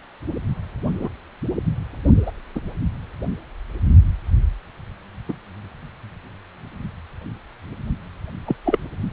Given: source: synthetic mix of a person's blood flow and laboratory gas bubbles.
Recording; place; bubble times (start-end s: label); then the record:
Doppler ultrasound of blood flow; precordium
1.01-1.09 s: bubbles
2.26-2.31 s: bubbles
2.55-2.60 s: bubbles
5.29-5.33 s: bubbles
8.46-8.56 s: bubbles
8.65-8.79 s: bubbles
From the record:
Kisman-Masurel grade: 122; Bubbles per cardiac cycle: 1 to 2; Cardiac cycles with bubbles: 10 to 50%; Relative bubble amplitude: moderate (0.250 to 0.450); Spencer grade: 2 (many but less than half of the cardiac periods contain bubble signals, singularly or in groups); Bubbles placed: anywhere in the cardiac cycle